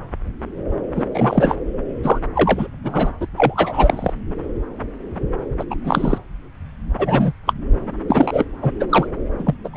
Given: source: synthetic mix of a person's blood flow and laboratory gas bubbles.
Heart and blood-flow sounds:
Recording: Doppler ultrasound of blood flow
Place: subclavian vein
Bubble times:
0.96-1.04 s: bubbles
1.14-1.55 s: bubbles
2.03-2.18 s: bubbles
2.35-2.67 s: bubbles
2.83-3.11 s: bubbles
3.20-3.26 s: bubbles
3.37-4.14 s: bubbles
5.59-5.64 s: bubbles
5.70-5.75 s: bubbles
5.84-6.19 s: bubbles
6.99-7.33 s: bubbles
7.46-7.53 s: bubbles
8.08-8.43 s: bubbles
8.62-8.71 s: bubbles
8.79-8.84 s: bubbles
8.89-9.06 s: bubbles
9.38-9.54 s: bubbles
9.64-9.69 s: bubbles
9.73-9.77 s: bubbles
From the record:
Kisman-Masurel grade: 233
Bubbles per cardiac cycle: several, 3 to 8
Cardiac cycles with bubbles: 50 to 99%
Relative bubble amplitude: loud (0.450 to 0.775)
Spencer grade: 3 (all of the cardiac periods contain showers or single bubble signals, but not dominating or overriding the cardiac motion signals)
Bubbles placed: anywhere in the cardiac cycle

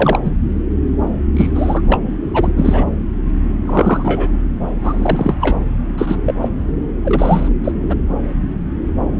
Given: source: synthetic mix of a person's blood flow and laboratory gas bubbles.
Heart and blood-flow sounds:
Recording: Doppler ultrasound of blood flow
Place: subclavian vein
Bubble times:
0.00-0.18 s: bubbles
0.24-0.30 s: bubbles
1.36-1.49 s: bubbles
1.54-1.81 s: bubbles
1.87-1.98 s: bubbles
2.33-2.52 s: bubbles
2.57-2.84 s: bubbles
3.65-4.29 s: bubbles
4.83-5.35 s: bubbles
5.40-5.56 s: bubbles
5.97-6.15 s: bubbles
6.26-6.34 s: bubbles
6.41-6.48 s: bubbles
7.04-7.49 s: bubbles
7.64-7.72 s: bubbles
7.89-7.96 s: bubbles
From the record:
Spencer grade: 3 (all of the cardiac periods contain showers or single bubble signals, but not dominating or overriding the cardiac motion signals)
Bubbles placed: anywhere in the cardiac cycle

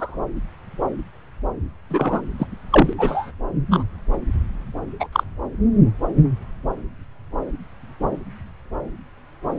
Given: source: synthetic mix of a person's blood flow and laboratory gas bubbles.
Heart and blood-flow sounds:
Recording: Doppler ultrasound of blood flow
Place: subclavian vein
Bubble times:
0.00-0.19 s: bubbles
1.90-2.21 s: bubbles
2.38-2.47 s: bubbles
2.71-2.93 s: bubbles
2.98-3.31 s: bubbles
3.71-3.83 s: bubbles
5.00-5.08 s: bubbles
5.12-5.24 s: bubbles
9.56-9.59 s: bubbles
From the record:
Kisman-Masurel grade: 123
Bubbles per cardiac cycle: 1 to 2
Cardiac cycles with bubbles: 10 to 50%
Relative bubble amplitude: loud (0.450 to 0.775)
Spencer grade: 2 (many but less than half of the cardiac periods contain bubble signals, singularly or in groups)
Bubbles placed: anywhere in the cardiac cycle

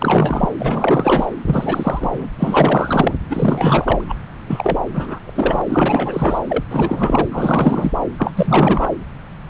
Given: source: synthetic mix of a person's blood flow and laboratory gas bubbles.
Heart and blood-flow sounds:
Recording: Doppler ultrasound of blood flow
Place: subclavian vein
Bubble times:
0.00-0.49 s: bubbles
0.60-1.26 s: bubbles
1.46-2.27 s: bubbles
2.38-3.17 s: bubbles
3.29-4.05 s: bubbles
4.08-4.16 s: bubbles
4.47-4.79 s: bubbles
4.92-5.20 s: bubbles
5.25-5.62 s: bubbles
5.65-6.39 s: bubbles
6.49-6.64 s: bubbles
6.70-7.28 s: bubbles
7.32-7.92 s: bubbles
8.18-8.33 s: bubbles
8.36-8.94 s: bubbles
From the record:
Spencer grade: 4 (maximum detectable bubble signal sounding continuously throughout systole and diastole of every cardiac period, and overriding the amplitude of the normal cardiac signals)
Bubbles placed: anywhere in the cardiac cycle

